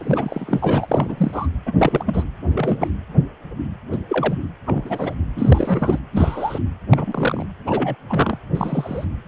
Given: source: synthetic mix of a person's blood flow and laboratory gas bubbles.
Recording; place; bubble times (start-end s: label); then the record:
Doppler ultrasound of blood flow; precordium
0.00-1.47 s: bubbles
1.66-1.73 s: bubbles
1.78-2.24 s: bubbles
2.42-2.88 s: bubbles
3.92-3.97 s: bubbles
4.09-4.39 s: bubbles
4.65-5.15 s: bubbles
5.35-5.99 s: bubbles
6.12-6.59 s: bubbles
6.88-7.46 s: bubbles
7.66-7.95 s: bubbles
8.09-8.38 s: bubbles
8.55-9.05 s: bubbles
From the record:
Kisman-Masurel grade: 232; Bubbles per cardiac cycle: several, 3 to 8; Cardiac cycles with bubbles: 50 to 99%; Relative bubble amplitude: moderate (0.250 to 0.450); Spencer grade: 3 (all of the cardiac periods contain showers or single bubble signals, but not dominating or overriding the cardiac motion signals); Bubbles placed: anywhere in the cardiac cycle